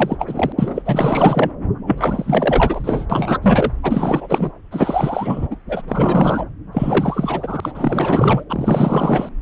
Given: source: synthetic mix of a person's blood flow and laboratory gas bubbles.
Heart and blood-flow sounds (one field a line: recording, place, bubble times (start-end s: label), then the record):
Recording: Doppler ultrasound of blood flow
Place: subclavian vein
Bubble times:
0.00-0.53 s: bubbles
0.58-0.82 s: bubbles
0.85-1.52 s: bubbles
1.87-3.06 s: bubbles
3.10-3.38 s: bubbles
3.42-3.72 s: bubbles
3.83-4.51 s: bubbles
4.71-5.48 s: bubbles
5.50-5.56 s: bubbles
5.68-5.82 s: bubbles
5.88-6.45 s: bubbles
6.72-8.44 s: bubbles
8.49-9.29 s: bubbles
From the record:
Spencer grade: 4 (maximum detectable bubble signal sounding continuously throughout systole and diastole of every cardiac period, and overriding the amplitude of the normal cardiac signals)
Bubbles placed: anywhere in the cardiac cycle